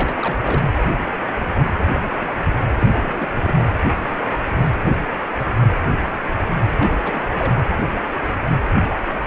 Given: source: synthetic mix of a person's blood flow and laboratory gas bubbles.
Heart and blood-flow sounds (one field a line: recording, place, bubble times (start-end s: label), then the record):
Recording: Doppler ultrasound of blood flow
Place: precordium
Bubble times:
0.00-0.64 s: bubbles
1.67-1.73 s: bubbles
1.86-2.04 s: bubbles
2.08-2.24 s: bubbles
2.79-2.90 s: bubbles
3.00-3.30 s: bubbles
3.35-3.64 s: bubbles
6.77-6.93 s: bubbles
7.04-7.21 s: bubbles
7.39-7.65 s: bubbles
From the record:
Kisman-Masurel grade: 221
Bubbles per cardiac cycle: several, 3 to 8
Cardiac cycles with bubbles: 10 to 50%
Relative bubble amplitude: barely perceptible (0.100 to 0.250)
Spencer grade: 2 (many but less than half of the cardiac periods contain bubble signals, singularly or in groups)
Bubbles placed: anywhere in the cardiac cycle